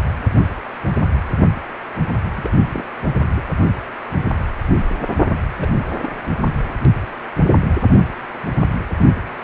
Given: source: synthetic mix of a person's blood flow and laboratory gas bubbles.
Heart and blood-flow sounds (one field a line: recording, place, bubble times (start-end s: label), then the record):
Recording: Doppler ultrasound of blood flow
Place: precordium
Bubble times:
2.36-2.53 s: bubbles
2.69-2.83 s: bubbles
3.35-3.42 s: bubbles
5.58-5.70 s: bubbles
6.03-6.09 s: bubbles
From the record:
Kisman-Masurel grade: 121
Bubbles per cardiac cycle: 1 to 2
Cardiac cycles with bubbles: 10 to 50%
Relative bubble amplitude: barely perceptible (0.100 to 0.250)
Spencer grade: 2 (many but less than half of the cardiac periods contain bubble signals, singularly or in groups)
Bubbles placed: only in the low amplitude regions of the cardiac cycle